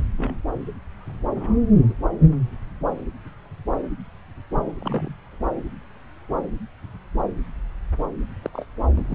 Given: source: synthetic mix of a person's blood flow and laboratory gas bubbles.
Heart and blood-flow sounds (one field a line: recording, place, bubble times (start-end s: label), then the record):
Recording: Doppler ultrasound of blood flow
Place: subclavian vein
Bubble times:
0.17-0.36 s: bubbles
1.35-1.58 s: bubbles
1.88-1.94 s: bubbles
4.79-5.16 s: bubbles
8.44-8.50 s: bubbles
8.53-8.65 s: bubbles
8.96-9.15 s: bubbles
From the record:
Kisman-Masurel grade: 121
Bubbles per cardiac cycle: 1 to 2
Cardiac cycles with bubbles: 10 to 50%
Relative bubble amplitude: barely perceptible (0.100 to 0.250)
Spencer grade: 2 (many but less than half of the cardiac periods contain bubble signals, singularly or in groups)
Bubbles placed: anywhere in the cardiac cycle